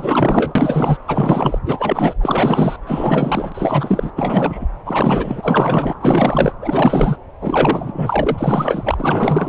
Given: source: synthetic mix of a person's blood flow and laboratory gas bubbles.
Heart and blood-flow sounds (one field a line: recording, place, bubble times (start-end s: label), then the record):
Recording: Doppler ultrasound of blood flow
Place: subclavian vein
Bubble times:
0.00-0.97 s: bubbles
1.06-1.58 s: bubbles
1.65-2.13 s: bubbles
2.20-2.77 s: bubbles
2.86-4.11 s: bubbles
4.16-4.67 s: bubbles
4.85-5.99 s: bubbles
6.03-6.53 s: bubbles
6.62-7.17 s: bubbles
7.41-9.49 s: bubbles
From the record:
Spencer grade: 4 (maximum detectable bubble signal sounding continuously throughout systole and diastole of every cardiac period, and overriding the amplitude of the normal cardiac signals)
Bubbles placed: anywhere in the cardiac cycle